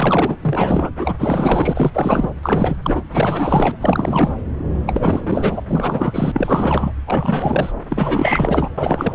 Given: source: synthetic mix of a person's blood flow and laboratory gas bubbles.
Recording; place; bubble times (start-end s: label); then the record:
Doppler ultrasound of blood flow; subclavian vein
0.00-0.36 s: bubbles
0.40-0.90 s: bubbles
0.99-1.15 s: bubbles
1.19-1.91 s: bubbles
1.94-2.31 s: bubbles
2.42-2.77 s: bubbles
2.82-3.02 s: bubbles
3.12-3.76 s: bubbles
3.80-4.33 s: bubbles
4.86-5.60 s: bubbles
5.68-6.93 s: bubbles
7.06-7.72 s: bubbles
7.90-8.69 s: bubbles
8.78-9.15 s: bubbles
From the record:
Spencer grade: 4 (maximum detectable bubble signal sounding continuously throughout systole and diastole of every cardiac period, and overriding the amplitude of the normal cardiac signals); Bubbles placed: anywhere in the cardiac cycle